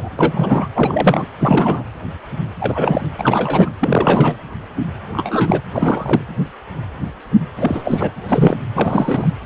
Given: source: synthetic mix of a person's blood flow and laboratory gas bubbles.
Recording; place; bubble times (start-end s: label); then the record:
Doppler ultrasound of blood flow; precordium
0.00-0.09 s: bubbles
0.16-0.68 s: bubbles
0.74-1.25 s: bubbles
1.39-1.84 s: bubbles
2.60-3.06 s: bubbles
3.18-3.71 s: bubbles
3.79-4.35 s: bubbles
5.12-5.61 s: bubbles
5.73-6.22 s: bubbles
7.56-8.12 s: bubbles
8.29-8.58 s: bubbles
8.75-9.30 s: bubbles
From the record:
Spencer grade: 3 (all of the cardiac periods contain showers or single bubble signals, but not dominating or overriding the cardiac motion signals); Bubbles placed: anywhere in the cardiac cycle